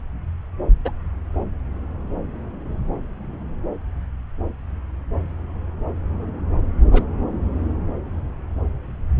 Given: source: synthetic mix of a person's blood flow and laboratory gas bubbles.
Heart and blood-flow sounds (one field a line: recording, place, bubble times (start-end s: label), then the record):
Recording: Doppler ultrasound of blood flow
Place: subclavian vein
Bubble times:
0.85-0.91 s: bubbles
6.91-7.03 s: bubbles
From the record:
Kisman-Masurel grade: 122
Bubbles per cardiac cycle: 1 to 2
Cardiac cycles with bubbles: 10 to 50%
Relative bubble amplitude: moderate (0.250 to 0.450)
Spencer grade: 2 (many but less than half of the cardiac periods contain bubble signals, singularly or in groups)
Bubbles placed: anywhere in the cardiac cycle